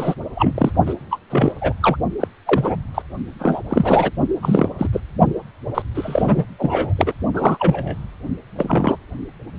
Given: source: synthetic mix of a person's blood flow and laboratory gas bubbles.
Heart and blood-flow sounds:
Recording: Doppler ultrasound of blood flow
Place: precordium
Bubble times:
0.00-0.15 s: bubbles
0.35-0.71 s: bubbles
0.85-0.94 s: bubbles
1.10-1.18 s: bubbles
1.30-1.52 s: bubbles
1.61-1.73 s: bubbles
1.82-1.97 s: bubbles
2.20-2.28 s: bubbles
2.46-2.76 s: bubbles
2.94-3.02 s: bubbles
3.39-3.62 s: bubbles
3.69-4.11 s: bubbles
4.42-4.69 s: bubbles
4.78-4.88 s: bubbles
4.92-5.00 s: bubbles
5.74-5.82 s: bubbles
5.95-6.44 s: bubbles
6.58-6.94 s: bubbles
6.98-7.13 s: bubbles
7.33-7.97 s: bubbles
8.57-8.97 s: bubbles
From the record:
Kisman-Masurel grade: 243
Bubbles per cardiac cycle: several, 3 to 8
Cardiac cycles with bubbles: 100%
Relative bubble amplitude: loud (0.450 to 0.775)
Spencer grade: 3 (all of the cardiac periods contain showers or single bubble signals, but not dominating or overriding the cardiac motion signals)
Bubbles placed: only in the low amplitude regions of the cardiac cycle

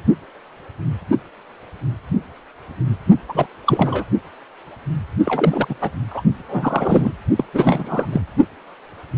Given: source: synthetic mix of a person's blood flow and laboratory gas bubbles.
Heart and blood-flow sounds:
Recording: Doppler ultrasound of blood flow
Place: precordium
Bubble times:
3.29-3.47 s: bubbles
3.66-4.04 s: bubbles
5.25-5.75 s: bubbles
5.81-5.92 s: bubbles
6.11-6.22 s: bubbles
6.40-6.43 s: bubbles
6.46-7.12 s: bubbles
7.36-7.45 s: bubbles
7.53-8.06 s: bubbles
8.12-8.21 s: bubbles
From the record:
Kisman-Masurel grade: 332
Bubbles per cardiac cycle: rolling drumbeat, 9 or more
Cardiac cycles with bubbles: 50 to 99%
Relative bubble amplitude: moderate (0.250 to 0.450)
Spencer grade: 3 (all of the cardiac periods contain showers or single bubble signals, but not dominating or overriding the cardiac motion signals)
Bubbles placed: only in the low amplitude regions of the cardiac cycle

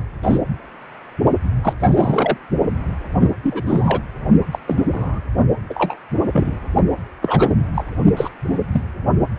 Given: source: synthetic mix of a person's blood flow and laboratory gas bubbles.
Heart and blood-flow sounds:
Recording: Doppler ultrasound of blood flow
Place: precordium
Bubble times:
0.23-0.39 s: bubbles
1.63-1.74 s: bubbles
1.80-2.38 s: bubbles
3.21-3.31 s: bubbles
3.43-4.02 s: bubbles
4.52-4.58 s: bubbles
4.67-5.21 s: bubbles
5.70-5.96 s: bubbles
6.33-6.58 s: bubbles
7.21-7.54 s: bubbles
7.74-7.84 s: bubbles
8.17-8.29 s: bubbles
8.53-8.59 s: bubbles
8.71-8.82 s: bubbles
From the record:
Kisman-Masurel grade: 242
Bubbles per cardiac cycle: several, 3 to 8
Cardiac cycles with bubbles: 100%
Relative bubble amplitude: moderate (0.250 to 0.450)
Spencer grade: 3 (all of the cardiac periods contain showers or single bubble signals, but not dominating or overriding the cardiac motion signals)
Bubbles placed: only in the low amplitude regions of the cardiac cycle

